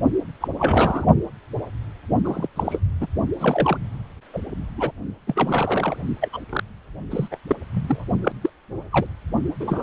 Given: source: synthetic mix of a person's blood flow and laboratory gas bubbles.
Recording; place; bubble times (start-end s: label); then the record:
Doppler ultrasound of blood flow; precordium
0.40-0.48 s: bubbles
0.57-1.06 s: bubbles
2.24-2.47 s: bubbles
2.56-2.80 s: bubbles
3.01-3.08 s: bubbles
3.40-3.78 s: bubbles
4.33-4.39 s: bubbles
4.77-4.91 s: bubbles
5.27-5.97 s: bubbles
6.21-6.29 s: bubbles
6.32-6.41 s: bubbles
6.49-6.63 s: bubbles
7.10-7.38 s: bubbles
7.48-7.55 s: bubbles
7.74-8.04 s: bubbles
8.22-8.32 s: bubbles
8.41-8.49 s: bubbles
8.92-9.07 s: bubbles
9.60-9.83 s: bubbles
From the record:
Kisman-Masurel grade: 232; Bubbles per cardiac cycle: several, 3 to 8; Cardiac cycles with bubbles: 50 to 99%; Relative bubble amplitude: moderate (0.250 to 0.450); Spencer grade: 3 (all of the cardiac periods contain showers or single bubble signals, but not dominating or overriding the cardiac motion signals); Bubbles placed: only in the low amplitude regions of the cardiac cycle